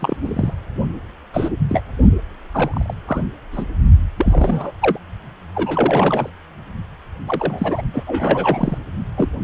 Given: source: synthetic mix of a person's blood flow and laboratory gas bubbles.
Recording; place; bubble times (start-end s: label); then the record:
Doppler ultrasound of blood flow; precordium
0.00-0.16 s: bubbles
0.22-0.53 s: bubbles
1.33-1.49 s: bubbles
1.68-1.81 s: bubbles
2.53-2.94 s: bubbles
3.07-3.27 s: bubbles
3.52-3.65 s: bubbles
4.17-4.71 s: bubbles
4.81-4.98 s: bubbles
5.54-6.29 s: bubbles
7.27-7.82 s: bubbles
7.93-8.04 s: bubbles
8.07-8.78 s: bubbles
9.17-9.29 s: bubbles
From the record:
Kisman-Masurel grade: 242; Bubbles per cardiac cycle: several, 3 to 8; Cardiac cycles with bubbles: 100%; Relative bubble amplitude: moderate (0.250 to 0.450); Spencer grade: 3 (all of the cardiac periods contain showers or single bubble signals, but not dominating or overriding the cardiac motion signals); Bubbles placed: only in the low amplitude regions of the cardiac cycle